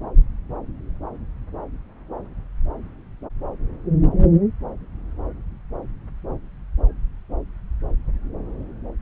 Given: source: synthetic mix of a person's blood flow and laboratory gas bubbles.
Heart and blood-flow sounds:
Doppler ultrasound of blood flow; subclavian vein
no bubbles
From the record:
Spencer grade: 0 (complete lack of bubble signals)

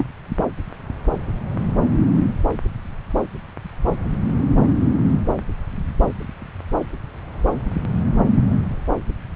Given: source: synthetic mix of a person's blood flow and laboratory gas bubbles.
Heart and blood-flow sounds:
Doppler ultrasound of blood flow; subclavian vein
0.00-0.09 s: bubbles
From the record:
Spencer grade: 1 (occasional bubble signal discernible with the cardiac motion signal, with majority of cardiac periods free of bubbles); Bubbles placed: anywhere in the cardiac cycle

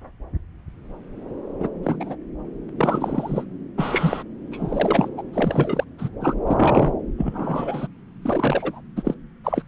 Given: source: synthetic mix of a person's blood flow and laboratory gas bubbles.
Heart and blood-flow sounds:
Doppler ultrasound of blood flow; subclavian vein
1.59-1.69 s: bubbles
1.83-2.16 s: bubbles
2.78-3.44 s: bubbles
3.77-4.23 s: bubbles
4.51-5.09 s: bubbles
5.17-5.23 s: bubbles
5.33-5.84 s: bubbles
5.99-6.08 s: bubbles
6.21-6.34 s: bubbles
6.47-6.92 s: bubbles
7.18-7.87 s: bubbles
8.22-8.80 s: bubbles
8.96-9.14 s: bubbles
9.44-9.62 s: bubbles
From the record:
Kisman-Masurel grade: 232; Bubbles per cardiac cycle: several, 3 to 8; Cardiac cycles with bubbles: 50 to 99%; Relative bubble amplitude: moderate (0.250 to 0.450); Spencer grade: 3 (all of the cardiac periods contain showers or single bubble signals, but not dominating or overriding the cardiac motion signals); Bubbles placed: anywhere in the cardiac cycle

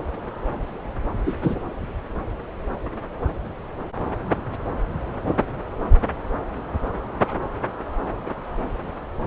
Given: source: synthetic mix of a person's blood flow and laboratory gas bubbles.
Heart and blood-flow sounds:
Doppler ultrasound of blood flow; subclavian vein
1.25-1.33 s: bubbles
1.43-1.55 s: bubbles
From the record:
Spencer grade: 1 (occasional bubble signal discernible with the cardiac motion signal, with majority of cardiac periods free of bubbles); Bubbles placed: anywhere in the cardiac cycle

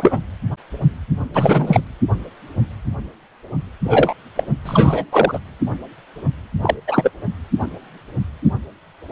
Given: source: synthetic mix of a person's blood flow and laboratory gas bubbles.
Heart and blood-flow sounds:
Doppler ultrasound of blood flow; precordium
0.00-0.19 s: bubbles
1.34-1.81 s: bubbles
3.84-4.13 s: bubbles
4.35-4.43 s: bubbles
4.65-5.04 s: bubbles
5.12-5.38 s: bubbles
6.62-6.75 s: bubbles
6.87-7.11 s: bubbles
From the record:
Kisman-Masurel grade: 223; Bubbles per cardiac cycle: several, 3 to 8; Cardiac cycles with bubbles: 10 to 50%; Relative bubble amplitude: loud (0.450 to 0.775); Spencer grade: 2 (many but less than half of the cardiac periods contain bubble signals, singularly or in groups); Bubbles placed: anywhere in the cardiac cycle

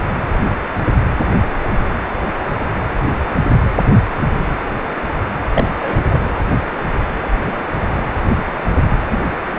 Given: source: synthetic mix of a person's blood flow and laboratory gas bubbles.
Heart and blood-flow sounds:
Doppler ultrasound of blood flow; precordium
5.54-5.64 s: bubbles
5.79-6.21 s: bubbles
7.42-7.63 s: bubbles
9.11-9.20 s: bubbles
From the record:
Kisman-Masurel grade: 122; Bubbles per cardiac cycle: 1 to 2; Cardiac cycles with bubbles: 10 to 50%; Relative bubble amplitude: moderate (0.250 to 0.450); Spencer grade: 2 (many but less than half of the cardiac periods contain bubble signals, singularly or in groups); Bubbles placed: anywhere in the cardiac cycle

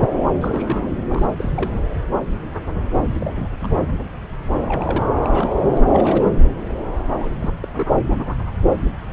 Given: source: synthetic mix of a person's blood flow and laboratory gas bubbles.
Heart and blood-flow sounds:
Doppler ultrasound of blood flow; subclavian vein
0.41-0.93 s: bubbles
1.10-1.26 s: bubbles
1.36-1.72 s: bubbles
3.19-3.49 s: bubbles
3.63-3.94 s: bubbles
4.59-5.02 s: bubbles
5.23-5.77 s: bubbles
5.87-6.33 s: bubbles
7.17-7.36 s: bubbles
7.39-7.50 s: bubbles
7.62-7.66 s: bubbles
7.78-7.87 s: bubbles
7.89-8.00 s: bubbles
From the record:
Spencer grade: 2 (many but less than half of the cardiac periods contain bubble signals, singularly or in groups); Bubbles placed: anywhere in the cardiac cycle

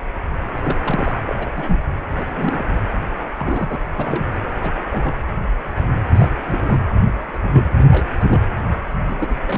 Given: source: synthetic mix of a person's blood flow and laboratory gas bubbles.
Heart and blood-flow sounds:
Doppler ultrasound of blood flow; precordium
0.63-1.12 s: bubbles
1.28-1.34 s: bubbles
1.40-1.83 s: bubbles
2.14-2.65 s: bubbles
3.38-3.76 s: bubbles
3.97-4.25 s: bubbles
4.61-4.71 s: bubbles
4.90-5.13 s: bubbles
6.15-6.28 s: bubbles
6.46-6.80 s: bubbles
7.33-7.38 s: bubbles
7.50-7.70 s: bubbles
7.78-7.85 s: bubbles
7.90-8.07 s: bubbles
8.20-8.25 s: bubbles
8.28-8.41 s: bubbles
9.07-9.35 s: bubbles
9.44-9.58 s: bubbles
From the record:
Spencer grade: 3 (all of the cardiac periods contain showers or single bubble signals, but not dominating or overriding the cardiac motion signals); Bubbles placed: anywhere in the cardiac cycle

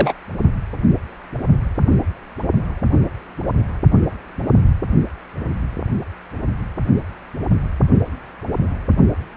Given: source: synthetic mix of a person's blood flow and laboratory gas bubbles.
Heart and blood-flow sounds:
Doppler ultrasound of blood flow; precordium
0.00-0.13 s: bubbles
From the record:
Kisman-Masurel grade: 213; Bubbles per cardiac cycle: several, 3 to 8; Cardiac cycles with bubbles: 1 to 10%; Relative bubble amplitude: loud (0.450 to 0.775); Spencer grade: 1 (occasional bubble signal discernible with the cardiac motion signal, with majority of cardiac periods free of bubbles); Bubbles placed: only in the low amplitude regions of the cardiac cycle

